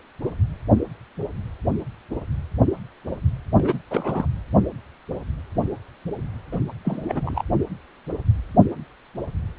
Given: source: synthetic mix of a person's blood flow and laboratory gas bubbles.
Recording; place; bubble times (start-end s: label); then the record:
Doppler ultrasound of blood flow; precordium
3.56-3.79 s: bubbles
3.90-4.26 s: bubbles
6.52-6.60 s: bubbles
6.84-7.43 s: bubbles
From the record:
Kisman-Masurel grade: 222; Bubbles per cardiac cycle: several, 3 to 8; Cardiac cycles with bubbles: 10 to 50%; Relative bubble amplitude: moderate (0.250 to 0.450); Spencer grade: 2 (many but less than half of the cardiac periods contain bubble signals, singularly or in groups); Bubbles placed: anywhere in the cardiac cycle